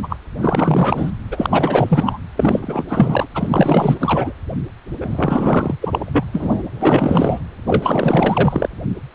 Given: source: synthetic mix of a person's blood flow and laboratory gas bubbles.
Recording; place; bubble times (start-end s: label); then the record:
Doppler ultrasound of blood flow; precordium
0.03-0.17 s: bubbles
0.41-1.12 s: bubbles
1.31-2.18 s: bubbles
2.36-2.84 s: bubbles
2.88-3.26 s: bubbles
3.34-4.33 s: bubbles
5.00-5.75 s: bubbles
5.80-6.25 s: bubbles
6.32-6.62 s: bubbles
6.81-7.39 s: bubbles
7.67-8.69 s: bubbles
From the record:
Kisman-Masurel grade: 444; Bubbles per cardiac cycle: continuous sound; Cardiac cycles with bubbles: 100%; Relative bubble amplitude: maximal (0.775 to 0.999); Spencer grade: 4 (maximum detectable bubble signal sounding continuously throughout systole and diastole of every cardiac period, and overriding the amplitude of the normal cardiac signals); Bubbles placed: anywhere in the cardiac cycle